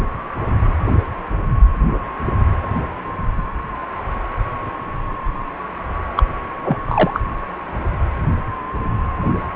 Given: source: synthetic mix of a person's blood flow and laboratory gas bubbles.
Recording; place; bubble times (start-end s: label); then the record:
Doppler ultrasound of blood flow; precordium
6.16-6.24 s: bubbles
6.64-6.79 s: bubbles
6.83-7.21 s: bubbles
From the record:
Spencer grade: 1 (occasional bubble signal discernible with the cardiac motion signal, with majority of cardiac periods free of bubbles); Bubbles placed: anywhere in the cardiac cycle